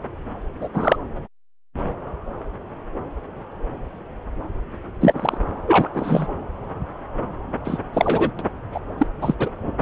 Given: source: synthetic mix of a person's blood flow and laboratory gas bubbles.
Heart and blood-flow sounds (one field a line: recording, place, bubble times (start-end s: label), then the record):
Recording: Doppler ultrasound of blood flow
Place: subclavian vein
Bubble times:
0.60-0.69 s: bubbles
0.74-0.96 s: bubbles
5.00-5.38 s: bubbles
5.67-5.88 s: bubbles
5.93-6.27 s: bubbles
7.64-7.78 s: bubbles
7.93-8.31 s: bubbles
8.39-8.45 s: bubbles
8.74-8.79 s: bubbles
8.97-9.07 s: bubbles
9.21-9.34 s: bubbles
9.39-9.49 s: bubbles
From the record:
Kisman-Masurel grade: 223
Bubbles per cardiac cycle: several, 3 to 8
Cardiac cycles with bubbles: 10 to 50%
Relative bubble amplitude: loud (0.450 to 0.775)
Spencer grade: 2 (many but less than half of the cardiac periods contain bubble signals, singularly or in groups)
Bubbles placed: anywhere in the cardiac cycle